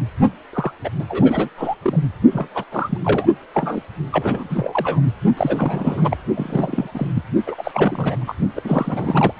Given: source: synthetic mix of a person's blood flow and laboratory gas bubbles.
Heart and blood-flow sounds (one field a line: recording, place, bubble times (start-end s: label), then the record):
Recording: Doppler ultrasound of blood flow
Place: precordium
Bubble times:
0.53-0.72 s: bubbles
0.84-0.90 s: bubbles
0.99-1.05 s: bubbles
1.08-1.49 s: bubbles
1.57-1.76 s: bubbles
1.82-2.04 s: bubbles
2.30-2.48 s: bubbles
2.54-2.64 s: bubbles
2.71-2.98 s: bubbles
3.04-3.28 s: bubbles
3.53-3.81 s: bubbles
4.12-4.47 s: bubbles
4.50-5.00 s: bubbles
5.37-6.17 s: bubbles
6.36-6.89 s: bubbles
6.94-7.10 s: bubbles
7.15-7.23 s: bubbles
7.46-8.35 s: bubbles
8.56-8.62 s: bubbles
8.64-9.32 s: bubbles
From the record:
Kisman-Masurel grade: 342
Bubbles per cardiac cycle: rolling drumbeat, 9 or more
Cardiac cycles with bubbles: 100%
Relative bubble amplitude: moderate (0.250 to 0.450)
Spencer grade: 3 (all of the cardiac periods contain showers or single bubble signals, but not dominating or overriding the cardiac motion signals)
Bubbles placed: only in the low amplitude regions of the cardiac cycle